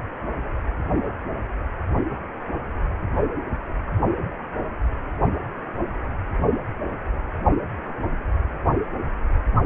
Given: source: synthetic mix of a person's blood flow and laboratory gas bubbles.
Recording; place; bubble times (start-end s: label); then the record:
Doppler ultrasound of blood flow; precordium
no bubbles
From the record:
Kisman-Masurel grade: 000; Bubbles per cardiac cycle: 0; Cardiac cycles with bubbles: 0%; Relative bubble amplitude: no bubbles discernible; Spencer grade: 0 (complete lack of bubble signals)